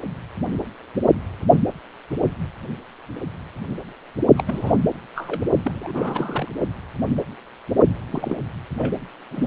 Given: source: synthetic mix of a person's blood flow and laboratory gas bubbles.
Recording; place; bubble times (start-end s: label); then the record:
Doppler ultrasound of blood flow; precordium
4.37-4.43 s: bubbles
4.46-4.77 s: bubbles
5.15-5.43 s: bubbles
5.64-6.48 s: bubbles
8.11-8.37 s: bubbles
8.78-8.94 s: bubbles
9.31-9.47 s: bubbles
From the record:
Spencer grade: 2 (many but less than half of the cardiac periods contain bubble signals, singularly or in groups); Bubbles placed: only in the low amplitude regions of the cardiac cycle